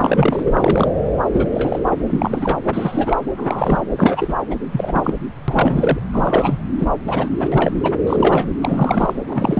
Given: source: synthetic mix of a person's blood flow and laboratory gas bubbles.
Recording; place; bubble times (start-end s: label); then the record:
Doppler ultrasound of blood flow; subclavian vein
0.00-0.40 s: bubbles
0.46-0.92 s: bubbles
1.32-1.48 s: bubbles
1.52-1.79 s: bubbles
1.85-1.96 s: bubbles
2.07-2.58 s: bubbles
2.71-3.21 s: bubbles
3.38-3.82 s: bubbles
3.97-4.35 s: bubbles
4.50-4.56 s: bubbles
4.72-5.14 s: bubbles
5.48-5.99 s: bubbles
6.12-6.59 s: bubbles
6.79-6.88 s: bubbles
7.07-7.29 s: bubbles
7.39-7.96 s: bubbles
8.02-8.48 s: bubbles
8.62-9.13 s: bubbles
9.25-9.60 s: bubbles
From the record:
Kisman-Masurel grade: 343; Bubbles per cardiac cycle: rolling drumbeat, 9 or more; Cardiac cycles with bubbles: 100%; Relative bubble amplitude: loud (0.450 to 0.775); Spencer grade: 3 (all of the cardiac periods contain showers or single bubble signals, but not dominating or overriding the cardiac motion signals); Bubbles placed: anywhere in the cardiac cycle